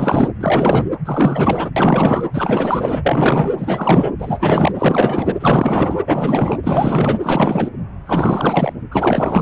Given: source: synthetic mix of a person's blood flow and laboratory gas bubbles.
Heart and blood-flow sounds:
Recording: Doppler ultrasound of blood flow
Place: precordium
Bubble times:
0.00-0.29 s: bubbles
0.40-0.85 s: bubbles
1.05-1.70 s: bubbles
1.76-2.24 s: bubbles
2.33-3.52 s: bubbles
3.57-4.10 s: bubbles
4.19-4.72 s: bubbles
4.78-5.34 s: bubbles
5.39-6.03 s: bubbles
6.06-6.58 s: bubbles
6.63-7.19 s: bubbles
7.22-7.68 s: bubbles
8.06-8.73 s: bubbles
8.90-9.42 s: bubbles
From the record:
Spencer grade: 4 (maximum detectable bubble signal sounding continuously throughout systole and diastole of every cardiac period, and overriding the amplitude of the normal cardiac signals)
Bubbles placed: anywhere in the cardiac cycle

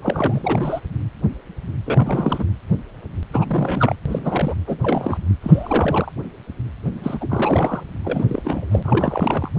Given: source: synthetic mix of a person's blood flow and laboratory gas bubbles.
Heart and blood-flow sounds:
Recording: Doppler ultrasound of blood flow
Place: precordium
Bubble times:
0.02-0.80 s: bubbles
1.86-2.44 s: bubbles
3.31-3.98 s: bubbles
4.06-4.54 s: bubbles
4.67-4.78 s: bubbles
4.83-5.18 s: bubbles
5.42-6.12 s: bubbles
7.03-7.83 s: bubbles
8.04-8.26 s: bubbles
8.29-8.65 s: bubbles
8.71-9.50 s: bubbles
From the record:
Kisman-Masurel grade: 332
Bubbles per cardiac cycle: rolling drumbeat, 9 or more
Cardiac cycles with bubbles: 50 to 99%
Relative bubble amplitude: moderate (0.250 to 0.450)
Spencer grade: 3 (all of the cardiac periods contain showers or single bubble signals, but not dominating or overriding the cardiac motion signals)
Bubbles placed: anywhere in the cardiac cycle

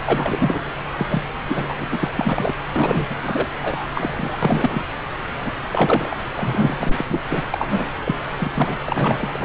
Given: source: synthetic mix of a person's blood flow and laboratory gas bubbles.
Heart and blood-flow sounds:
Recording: Doppler ultrasound of blood flow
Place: subclavian vein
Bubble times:
0.04-0.70 s: bubbles
0.96-1.06 s: bubbles
1.09-1.23 s: bubbles
1.48-1.75 s: bubbles
1.80-1.86 s: bubbles
1.90-2.11 s: bubbles
2.17-2.53 s: bubbles
2.74-3.06 s: bubbles
3.09-3.16 s: bubbles
3.22-3.47 s: bubbles
3.61-3.87 s: bubbles
3.95-4.39 s: bubbles
4.42-4.86 s: bubbles
5.41-5.52 s: bubbles
5.69-6.23 s: bubbles
6.38-7.04 s: bubbles
7.08-7.23 s: bubbles
7.29-7.42 s: bubbles
7.51-7.91 s: bubbles
8.04-8.16 s: bubbles
8.38-8.79 s: bubbles
8.88-9.45 s: bubbles
From the record:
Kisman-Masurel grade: 342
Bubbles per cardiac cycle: rolling drumbeat, 9 or more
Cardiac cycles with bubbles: 100%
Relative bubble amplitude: moderate (0.250 to 0.450)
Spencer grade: 3 (all of the cardiac periods contain showers or single bubble signals, but not dominating or overriding the cardiac motion signals)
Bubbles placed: anywhere in the cardiac cycle

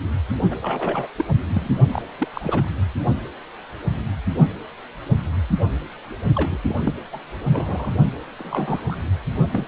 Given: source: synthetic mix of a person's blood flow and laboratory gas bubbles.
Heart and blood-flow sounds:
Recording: Doppler ultrasound of blood flow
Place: precordium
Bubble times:
0.51-0.56 s: bubbles
0.62-1.07 s: bubbles
1.17-1.25 s: bubbles
1.48-1.70 s: bubbles
1.92-2.02 s: bubbles
2.19-2.28 s: bubbles
2.33-2.63 s: bubbles
6.35-6.58 s: bubbles
6.67-6.95 s: bubbles
7.12-7.20 s: bubbles
7.50-7.91 s: bubbles
8.39-8.82 s: bubbles
8.88-8.96 s: bubbles
9.52-9.66 s: bubbles
From the record:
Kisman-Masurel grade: 232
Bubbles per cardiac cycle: several, 3 to 8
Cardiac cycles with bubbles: 50 to 99%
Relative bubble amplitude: moderate (0.250 to 0.450)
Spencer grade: 3 (all of the cardiac periods contain showers or single bubble signals, but not dominating or overriding the cardiac motion signals)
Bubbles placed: only in the low amplitude regions of the cardiac cycle

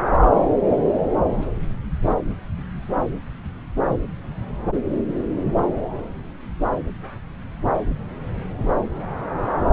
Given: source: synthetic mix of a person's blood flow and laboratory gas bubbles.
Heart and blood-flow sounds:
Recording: Doppler ultrasound of blood flow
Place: subclavian vein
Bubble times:
8.58-8.74 s: bubbles
From the record:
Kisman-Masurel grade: 111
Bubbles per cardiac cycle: 1 to 2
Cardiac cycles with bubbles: 1 to 10%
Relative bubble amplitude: barely perceptible (0.100 to 0.250)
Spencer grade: 1 (occasional bubble signal discernible with the cardiac motion signal, with majority of cardiac periods free of bubbles)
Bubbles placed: anywhere in the cardiac cycle

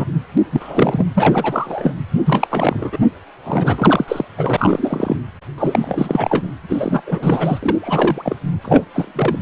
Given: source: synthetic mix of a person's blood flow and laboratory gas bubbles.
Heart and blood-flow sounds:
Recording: Doppler ultrasound of blood flow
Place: precordium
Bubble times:
0.00-0.05 s: bubbles
0.37-0.40 s: bubbles
0.52-1.06 s: bubbles
1.13-1.94 s: bubbles
2.25-2.98 s: bubbles
3.44-4.04 s: bubbles
4.08-4.25 s: bubbles
4.37-5.16 s: bubbles
5.58-6.47 s: bubbles
6.68-7.01 s: bubbles
7.06-7.58 s: bubbles
7.62-8.36 s: bubbles
8.64-8.86 s: bubbles
8.94-9.42 s: bubbles
From the record:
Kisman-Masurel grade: 343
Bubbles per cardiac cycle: rolling drumbeat, 9 or more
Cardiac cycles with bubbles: 100%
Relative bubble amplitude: loud (0.450 to 0.775)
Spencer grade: 3 (all of the cardiac periods contain showers or single bubble signals, but not dominating or overriding the cardiac motion signals)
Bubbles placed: anywhere in the cardiac cycle

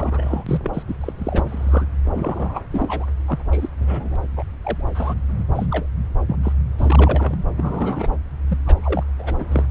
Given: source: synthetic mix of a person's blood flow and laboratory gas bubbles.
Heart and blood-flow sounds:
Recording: Doppler ultrasound of blood flow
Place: subclavian vein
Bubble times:
0.00-0.83 s: bubbles
0.88-0.94 s: bubbles
1.00-1.12 s: bubbles
1.18-1.86 s: bubbles
2.05-2.61 s: bubbles
2.71-3.06 s: bubbles
3.27-3.38 s: bubbles
3.51-3.68 s: bubbles
3.79-4.16 s: bubbles
4.36-4.44 s: bubbles
4.61-4.88 s: bubbles
4.95-5.15 s: bubbles
5.38-5.44 s: bubbles
5.55-5.66 s: bubbles
5.71-5.86 s: bubbles
6.29-6.36 s: bubbles
6.43-6.53 s: bubbles
6.78-7.36 s: bubbles
7.57-8.17 s: bubbles
8.48-8.58 s: bubbles
8.66-9.04 s: bubbles
9.18-9.46 s: bubbles
9.51-9.63 s: bubbles
From the record:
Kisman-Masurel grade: 242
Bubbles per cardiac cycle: several, 3 to 8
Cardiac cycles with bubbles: 100%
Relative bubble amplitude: moderate (0.250 to 0.450)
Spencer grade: 3 (all of the cardiac periods contain showers or single bubble signals, but not dominating or overriding the cardiac motion signals)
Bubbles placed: anywhere in the cardiac cycle

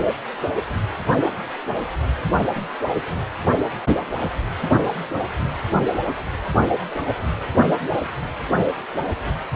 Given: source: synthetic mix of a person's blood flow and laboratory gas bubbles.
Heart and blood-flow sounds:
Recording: Doppler ultrasound of blood flow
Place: precordium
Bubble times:
2.56-2.65 s: bubbles
From the record:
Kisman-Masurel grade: 121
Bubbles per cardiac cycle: 1 to 2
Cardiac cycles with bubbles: 10 to 50%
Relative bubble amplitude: barely perceptible (0.100 to 0.250)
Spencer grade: 2 (many but less than half of the cardiac periods contain bubble signals, singularly or in groups)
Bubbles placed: only in the low amplitude regions of the cardiac cycle

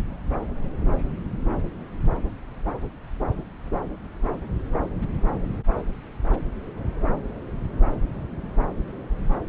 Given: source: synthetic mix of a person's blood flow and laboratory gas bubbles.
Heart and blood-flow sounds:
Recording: Doppler ultrasound of blood flow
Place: subclavian vein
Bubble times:
no bubbles
From the record:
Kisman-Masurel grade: 000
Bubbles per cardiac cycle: 0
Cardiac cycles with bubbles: 0%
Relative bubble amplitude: no bubbles discernible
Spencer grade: 0 (complete lack of bubble signals)

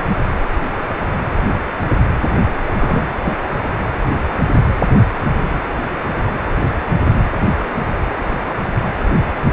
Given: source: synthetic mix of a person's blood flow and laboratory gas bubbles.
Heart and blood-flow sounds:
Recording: Doppler ultrasound of blood flow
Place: precordium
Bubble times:
2.78-3.14 s: bubbles
3.22-3.35 s: bubbles
From the record:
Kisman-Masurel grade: 212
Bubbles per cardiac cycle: several, 3 to 8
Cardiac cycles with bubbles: 1 to 10%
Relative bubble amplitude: moderate (0.250 to 0.450)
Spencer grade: 1 (occasional bubble signal discernible with the cardiac motion signal, with majority of cardiac periods free of bubbles)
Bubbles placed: anywhere in the cardiac cycle

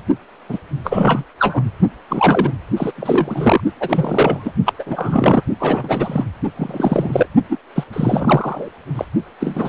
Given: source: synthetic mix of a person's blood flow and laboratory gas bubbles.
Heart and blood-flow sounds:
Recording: Doppler ultrasound of blood flow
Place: precordium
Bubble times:
0.48-0.58 s: bubbles
0.84-1.24 s: bubbles
1.39-1.63 s: bubbles
2.08-2.52 s: bubbles
2.77-2.92 s: bubbles
2.97-3.62 s: bubbles
3.81-4.52 s: bubbles
4.66-4.73 s: bubbles
4.79-4.84 s: bubbles
4.86-5.42 s: bubbles
5.59-6.25 s: bubbles
6.56-7.27 s: bubbles
7.49-7.58 s: bubbles
7.75-7.84 s: bubbles
7.93-8.69 s: bubbles
8.95-9.05 s: bubbles
9.40-9.69 s: bubbles
From the record:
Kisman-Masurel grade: 343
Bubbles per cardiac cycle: rolling drumbeat, 9 or more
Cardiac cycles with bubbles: 100%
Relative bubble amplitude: loud (0.450 to 0.775)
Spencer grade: 3 (all of the cardiac periods contain showers or single bubble signals, but not dominating or overriding the cardiac motion signals)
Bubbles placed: only in the low amplitude regions of the cardiac cycle

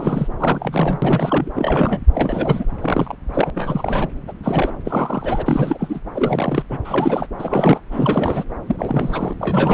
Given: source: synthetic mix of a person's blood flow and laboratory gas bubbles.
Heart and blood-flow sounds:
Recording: Doppler ultrasound of blood flow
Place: subclavian vein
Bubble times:
0.00-0.28 s: bubbles
0.39-0.99 s: bubbles
1.02-1.51 s: bubbles
1.55-2.02 s: bubbles
2.14-2.65 s: bubbles
2.81-3.15 s: bubbles
3.33-3.50 s: bubbles
3.54-4.08 s: bubbles
4.27-4.33 s: bubbles
4.43-4.72 s: bubbles
4.84-5.99 s: bubbles
6.13-6.63 s: bubbles
6.70-6.78 s: bubbles
6.84-7.26 s: bubbles
7.38-7.80 s: bubbles
7.92-8.44 s: bubbles
8.66-9.34 s: bubbles
9.39-9.74 s: bubbles
From the record:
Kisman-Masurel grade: 342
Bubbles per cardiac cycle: rolling drumbeat, 9 or more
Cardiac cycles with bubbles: 100%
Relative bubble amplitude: moderate (0.250 to 0.450)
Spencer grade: 3 (all of the cardiac periods contain showers or single bubble signals, but not dominating or overriding the cardiac motion signals)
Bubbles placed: anywhere in the cardiac cycle

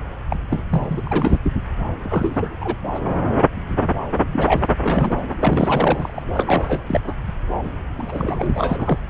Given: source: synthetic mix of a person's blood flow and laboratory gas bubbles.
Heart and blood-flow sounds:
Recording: Doppler ultrasound of blood flow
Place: subclavian vein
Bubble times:
0.29-0.36 s: bubbles
0.50-0.63 s: bubbles
0.69-1.01 s: bubbles
1.06-1.39 s: bubbles
1.43-1.52 s: bubbles
2.03-2.56 s: bubbles
2.60-2.75 s: bubbles
2.94-3.00 s: bubbles
4.33-4.68 s: bubbles
4.83-5.21 s: bubbles
5.32-6.23 s: bubbles
6.33-7.01 s: bubbles
7.04-7.14 s: bubbles
7.63-7.71 s: bubbles
7.98-8.98 s: bubbles
From the record:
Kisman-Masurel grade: 332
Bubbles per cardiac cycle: rolling drumbeat, 9 or more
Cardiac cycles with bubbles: 50 to 99%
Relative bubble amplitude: moderate (0.250 to 0.450)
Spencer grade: 3 (all of the cardiac periods contain showers or single bubble signals, but not dominating or overriding the cardiac motion signals)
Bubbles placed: anywhere in the cardiac cycle

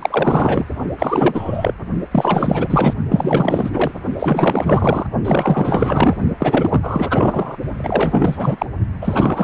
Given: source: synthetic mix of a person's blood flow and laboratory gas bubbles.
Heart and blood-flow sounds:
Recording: Doppler ultrasound of blood flow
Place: precordium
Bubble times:
0.00-0.65 s: bubbles
0.99-1.74 s: bubbles
2.11-2.94 s: bubbles
3.09-3.92 s: bubbles
4.19-5.07 s: bubbles
5.24-6.17 s: bubbles
6.39-7.57 s: bubbles
7.78-8.66 s: bubbles
9.01-9.44 s: bubbles
From the record:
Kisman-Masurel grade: 444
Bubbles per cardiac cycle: continuous sound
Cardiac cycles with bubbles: 100%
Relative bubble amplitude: maximal (0.775 to 0.999)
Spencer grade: 4 (maximum detectable bubble signal sounding continuously throughout systole and diastole of every cardiac period, and overriding the amplitude of the normal cardiac signals)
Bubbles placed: only in the low amplitude regions of the cardiac cycle

